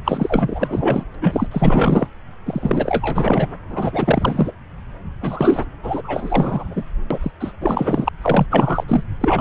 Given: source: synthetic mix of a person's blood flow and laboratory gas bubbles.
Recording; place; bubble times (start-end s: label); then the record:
Doppler ultrasound of blood flow; subclavian vein
0.05-1.04 s: bubbles
1.21-1.47 s: bubbles
1.51-2.07 s: bubbles
2.45-3.47 s: bubbles
3.69-4.53 s: bubbles
5.21-5.65 s: bubbles
5.83-6.83 s: bubbles
7.11-7.18 s: bubbles
7.22-7.32 s: bubbles
7.40-7.53 s: bubbles
7.60-8.09 s: bubbles
8.21-8.46 s: bubbles
8.50-8.84 s: bubbles
8.88-9.04 s: bubbles
9.20-9.41 s: bubbles
From the record:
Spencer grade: 4 (maximum detectable bubble signal sounding continuously throughout systole and diastole of every cardiac period, and overriding the amplitude of the normal cardiac signals); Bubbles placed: anywhere in the cardiac cycle